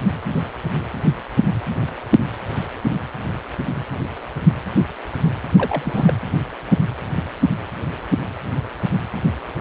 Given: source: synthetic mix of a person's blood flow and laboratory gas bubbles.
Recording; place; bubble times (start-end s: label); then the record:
Doppler ultrasound of blood flow; precordium
5.56-6.14 s: bubbles
From the record:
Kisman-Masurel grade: 212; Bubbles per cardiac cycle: several, 3 to 8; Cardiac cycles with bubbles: 1 to 10%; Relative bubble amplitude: moderate (0.250 to 0.450); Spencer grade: 1 (occasional bubble signal discernible with the cardiac motion signal, with majority of cardiac periods free of bubbles); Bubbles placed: anywhere in the cardiac cycle